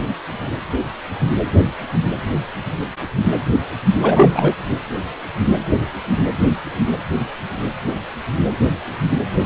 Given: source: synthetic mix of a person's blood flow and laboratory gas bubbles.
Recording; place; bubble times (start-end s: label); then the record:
Doppler ultrasound of blood flow; precordium
3.99-4.54 s: bubbles
From the record:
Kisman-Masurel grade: 213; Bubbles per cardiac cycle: several, 3 to 8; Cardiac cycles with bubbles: 1 to 10%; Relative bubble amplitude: loud (0.450 to 0.775); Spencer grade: 1 (occasional bubble signal discernible with the cardiac motion signal, with majority of cardiac periods free of bubbles); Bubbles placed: anywhere in the cardiac cycle